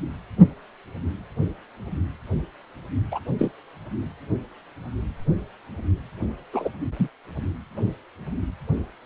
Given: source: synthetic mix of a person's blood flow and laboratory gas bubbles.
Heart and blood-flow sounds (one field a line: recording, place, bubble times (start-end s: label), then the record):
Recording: Doppler ultrasound of blood flow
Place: precordium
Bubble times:
3.12-3.20 s: bubbles
3.38-3.51 s: bubbles
6.53-6.69 s: bubbles
6.99-7.08 s: bubbles
From the record:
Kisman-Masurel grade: 122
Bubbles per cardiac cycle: 1 to 2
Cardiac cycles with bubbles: 10 to 50%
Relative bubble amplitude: moderate (0.250 to 0.450)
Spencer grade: 2 (many but less than half of the cardiac periods contain bubble signals, singularly or in groups)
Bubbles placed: only in the low amplitude regions of the cardiac cycle